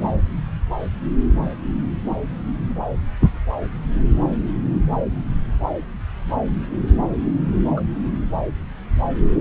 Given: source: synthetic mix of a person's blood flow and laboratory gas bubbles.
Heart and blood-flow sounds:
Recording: Doppler ultrasound of blood flow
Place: subclavian vein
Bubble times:
3.21-3.30 s: bubbles
7.76-7.81 s: bubbles
From the record:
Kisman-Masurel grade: 122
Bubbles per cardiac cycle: 1 to 2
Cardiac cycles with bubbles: 10 to 50%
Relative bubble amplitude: moderate (0.250 to 0.450)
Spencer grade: 2 (many but less than half of the cardiac periods contain bubble signals, singularly or in groups)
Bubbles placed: anywhere in the cardiac cycle

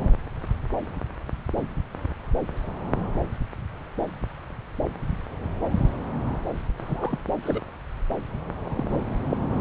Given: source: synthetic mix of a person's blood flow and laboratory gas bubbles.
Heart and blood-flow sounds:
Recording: Doppler ultrasound of blood flow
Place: subclavian vein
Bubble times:
6.83-7.18 s: bubbles
7.43-7.62 s: bubbles
8.59-9.01 s: bubbles
9.30-9.37 s: bubbles
From the record:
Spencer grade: 2 (many but less than half of the cardiac periods contain bubble signals, singularly or in groups)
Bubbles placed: anywhere in the cardiac cycle

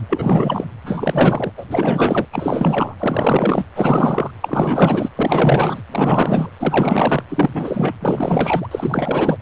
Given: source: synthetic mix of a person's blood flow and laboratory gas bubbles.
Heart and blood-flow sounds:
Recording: Doppler ultrasound of blood flow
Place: precordium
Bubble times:
0.09-0.65 s: bubbles
0.85-1.51 s: bubbles
1.57-1.65 s: bubbles
1.70-2.27 s: bubbles
2.33-2.96 s: bubbles
3.00-3.65 s: bubbles
3.76-4.30 s: bubbles
4.41-5.09 s: bubbles
5.16-5.82 s: bubbles
5.91-6.50 s: bubbles
6.59-7.24 s: bubbles
7.29-7.50 s: bubbles
7.54-7.93 s: bubbles
8.00-8.67 s: bubbles
8.71-9.38 s: bubbles
From the record:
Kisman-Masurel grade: 444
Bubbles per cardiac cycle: continuous sound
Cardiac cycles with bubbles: 100%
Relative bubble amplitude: maximal (0.775 to 0.999)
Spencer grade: 4 (maximum detectable bubble signal sounding continuously throughout systole and diastole of every cardiac period, and overriding the amplitude of the normal cardiac signals)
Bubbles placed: anywhere in the cardiac cycle

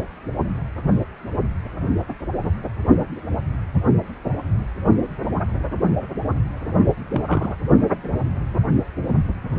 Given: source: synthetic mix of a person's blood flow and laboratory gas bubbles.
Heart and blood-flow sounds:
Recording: Doppler ultrasound of blood flow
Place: precordium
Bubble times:
7.12-7.56 s: bubbles
From the record:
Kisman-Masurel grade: 112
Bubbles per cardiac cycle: 1 to 2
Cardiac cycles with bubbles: 1 to 10%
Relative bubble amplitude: moderate (0.250 to 0.450)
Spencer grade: 1 (occasional bubble signal discernible with the cardiac motion signal, with majority of cardiac periods free of bubbles)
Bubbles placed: only in the low amplitude regions of the cardiac cycle

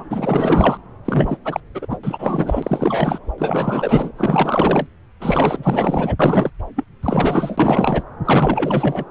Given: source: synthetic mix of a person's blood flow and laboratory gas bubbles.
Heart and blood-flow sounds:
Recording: Doppler ultrasound of blood flow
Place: subclavian vein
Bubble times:
0.00-0.04 s: bubbles
0.10-0.78 s: bubbles
1.05-1.37 s: bubbles
1.45-1.60 s: bubbles
1.74-1.86 s: bubbles
1.90-1.98 s: bubbles
2.03-3.19 s: bubbles
3.38-4.12 s: bubbles
4.16-4.87 s: bubbles
5.20-6.16 s: bubbles
6.19-6.50 s: bubbles
6.75-6.84 s: bubbles
7.03-8.03 s: bubbles
8.25-9.05 s: bubbles
From the record:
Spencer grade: 4 (maximum detectable bubble signal sounding continuously throughout systole and diastole of every cardiac period, and overriding the amplitude of the normal cardiac signals)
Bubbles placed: anywhere in the cardiac cycle

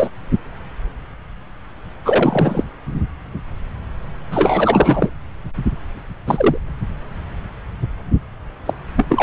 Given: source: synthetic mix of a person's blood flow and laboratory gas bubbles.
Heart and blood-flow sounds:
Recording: Doppler ultrasound of blood flow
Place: subclavian vein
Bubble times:
0.00-0.09 s: bubbles
2.04-2.64 s: bubbles
4.31-5.10 s: bubbles
6.27-6.57 s: bubbles
8.65-8.73 s: bubbles
8.96-9.05 s: bubbles
9.09-9.23 s: bubbles
From the record:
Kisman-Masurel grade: 233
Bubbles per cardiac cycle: several, 3 to 8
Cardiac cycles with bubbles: 50 to 99%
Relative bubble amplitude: loud (0.450 to 0.775)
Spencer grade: 3 (all of the cardiac periods contain showers or single bubble signals, but not dominating or overriding the cardiac motion signals)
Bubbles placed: anywhere in the cardiac cycle

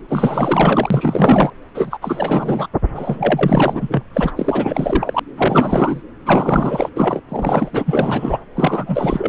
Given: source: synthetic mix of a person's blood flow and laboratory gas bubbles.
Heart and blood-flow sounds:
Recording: Doppler ultrasound of blood flow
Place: subclavian vein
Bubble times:
0.09-1.50 s: bubbles
1.74-1.98 s: bubbles
2.01-2.67 s: bubbles
2.95-4.04 s: bubbles
4.13-4.32 s: bubbles
4.37-5.20 s: bubbles
5.37-6.03 s: bubbles
6.25-6.90 s: bubbles
6.96-7.21 s: bubbles
7.29-8.38 s: bubbles
8.55-9.28 s: bubbles
From the record:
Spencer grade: 4 (maximum detectable bubble signal sounding continuously throughout systole and diastole of every cardiac period, and overriding the amplitude of the normal cardiac signals)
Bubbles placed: anywhere in the cardiac cycle

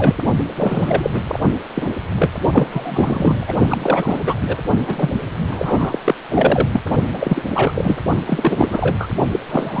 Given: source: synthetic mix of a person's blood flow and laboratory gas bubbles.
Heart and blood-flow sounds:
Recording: Doppler ultrasound of blood flow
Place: precordium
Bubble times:
0.00-0.20 s: bubbles
0.56-1.23 s: bubbles
1.27-1.40 s: bubbles
1.74-1.92 s: bubbles
2.16-2.31 s: bubbles
2.50-2.68 s: bubbles
2.71-3.53 s: bubbles
3.69-4.19 s: bubbles
4.27-4.34 s: bubbles
4.41-4.58 s: bubbles
4.87-5.09 s: bubbles
5.48-5.99 s: bubbles
6.04-6.15 s: bubbles
6.29-6.80 s: bubbles
7.12-7.42 s: bubbles
7.49-7.71 s: bubbles
7.75-7.96 s: bubbles
8.27-9.08 s: bubbles
9.31-9.39 s: bubbles
9.49-9.80 s: bubbles
From the record:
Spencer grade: 3 (all of the cardiac periods contain showers or single bubble signals, but not dominating or overriding the cardiac motion signals)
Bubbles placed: only in the low amplitude regions of the cardiac cycle

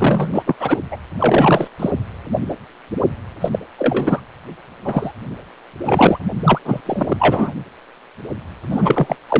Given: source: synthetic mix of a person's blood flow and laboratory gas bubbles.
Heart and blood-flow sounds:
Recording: Doppler ultrasound of blood flow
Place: precordium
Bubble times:
0.00-0.43 s: bubbles
0.46-0.55 s: bubbles
0.59-0.81 s: bubbles
0.90-0.97 s: bubbles
1.18-1.67 s: bubbles
1.79-1.92 s: bubbles
3.40-3.50 s: bubbles
3.52-3.59 s: bubbles
3.78-4.21 s: bubbles
4.84-5.11 s: bubbles
5.83-6.19 s: bubbles
6.44-6.59 s: bubbles
6.65-6.81 s: bubbles
6.86-7.52 s: bubbles
8.70-9.17 s: bubbles
9.29-9.40 s: bubbles
From the record:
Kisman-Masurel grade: 333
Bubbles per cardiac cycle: rolling drumbeat, 9 or more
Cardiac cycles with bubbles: 50 to 99%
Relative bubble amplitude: loud (0.450 to 0.775)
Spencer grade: 3 (all of the cardiac periods contain showers or single bubble signals, but not dominating or overriding the cardiac motion signals)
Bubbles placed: anywhere in the cardiac cycle

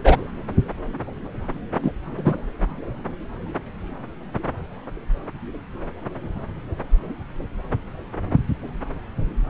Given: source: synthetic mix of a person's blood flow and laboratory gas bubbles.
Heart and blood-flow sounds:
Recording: Doppler ultrasound of blood flow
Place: subclavian vein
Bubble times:
0.04-0.18 s: bubbles
1.82-1.93 s: bubbles
2.16-2.38 s: bubbles
From the record:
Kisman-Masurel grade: 113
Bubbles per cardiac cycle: 1 to 2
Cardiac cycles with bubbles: 1 to 10%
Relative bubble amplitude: loud (0.450 to 0.775)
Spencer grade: 1 (occasional bubble signal discernible with the cardiac motion signal, with majority of cardiac periods free of bubbles)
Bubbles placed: anywhere in the cardiac cycle

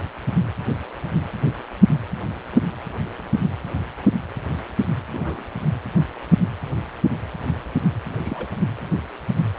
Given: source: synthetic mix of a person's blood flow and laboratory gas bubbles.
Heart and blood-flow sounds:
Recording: Doppler ultrasound of blood flow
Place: precordium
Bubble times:
5.12-5.49 s: bubbles
8.09-8.47 s: bubbles
From the record:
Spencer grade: 1 (occasional bubble signal discernible with the cardiac motion signal, with majority of cardiac periods free of bubbles)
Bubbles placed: anywhere in the cardiac cycle

